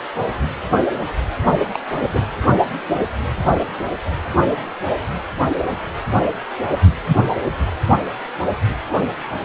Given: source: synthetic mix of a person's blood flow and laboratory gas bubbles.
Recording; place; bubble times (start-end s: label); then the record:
Doppler ultrasound of blood flow; precordium
1.73-1.79 s: bubbles
2.05-2.27 s: bubbles
From the record:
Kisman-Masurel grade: 112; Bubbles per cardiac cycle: 1 to 2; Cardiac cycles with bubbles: 1 to 10%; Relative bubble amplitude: moderate (0.250 to 0.450); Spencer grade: 1 (occasional bubble signal discernible with the cardiac motion signal, with majority of cardiac periods free of bubbles); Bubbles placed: anywhere in the cardiac cycle